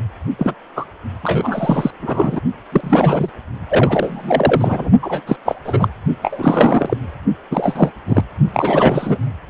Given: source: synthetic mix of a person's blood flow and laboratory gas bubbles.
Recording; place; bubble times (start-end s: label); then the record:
Doppler ultrasound of blood flow; precordium
0.38-0.54 s: bubbles
0.76-0.85 s: bubbles
1.23-1.91 s: bubbles
2.02-2.40 s: bubbles
2.72-3.29 s: bubbles
3.68-4.91 s: bubbles
5.02-5.20 s: bubbles
5.26-5.36 s: bubbles
5.45-5.55 s: bubbles
5.64-5.88 s: bubbles
6.21-6.97 s: bubbles
7.51-7.91 s: bubbles
8.06-8.24 s: bubbles
8.53-9.18 s: bubbles
From the record:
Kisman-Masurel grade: 343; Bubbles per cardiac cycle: rolling drumbeat, 9 or more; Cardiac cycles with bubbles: 100%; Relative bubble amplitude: loud (0.450 to 0.775); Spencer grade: 3 (all of the cardiac periods contain showers or single bubble signals, but not dominating or overriding the cardiac motion signals); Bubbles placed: only in the low amplitude regions of the cardiac cycle